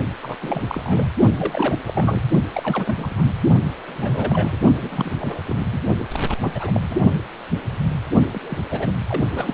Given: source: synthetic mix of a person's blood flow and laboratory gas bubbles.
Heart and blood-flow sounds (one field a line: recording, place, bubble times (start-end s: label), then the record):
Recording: Doppler ultrasound of blood flow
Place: precordium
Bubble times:
0.22-0.35 s: bubbles
0.42-0.62 s: bubbles
0.68-1.05 s: bubbles
1.38-1.78 s: bubbles
1.86-2.21 s: bubbles
2.54-3.29 s: bubbles
3.87-4.57 s: bubbles
4.82-5.41 s: bubbles
5.47-5.68 s: bubbles
5.72-5.79 s: bubbles
5.98-6.06 s: bubbles
6.13-6.20 s: bubbles
6.28-6.35 s: bubbles
6.42-6.97 s: bubbles
8.33-8.62 s: bubbles
8.71-8.93 s: bubbles
9.07-9.22 s: bubbles
9.30-9.54 s: bubbles
From the record:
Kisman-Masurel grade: 332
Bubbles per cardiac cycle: rolling drumbeat, 9 or more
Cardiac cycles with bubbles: 50 to 99%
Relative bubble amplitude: moderate (0.250 to 0.450)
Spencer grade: 3 (all of the cardiac periods contain showers or single bubble signals, but not dominating or overriding the cardiac motion signals)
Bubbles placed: only in the low amplitude regions of the cardiac cycle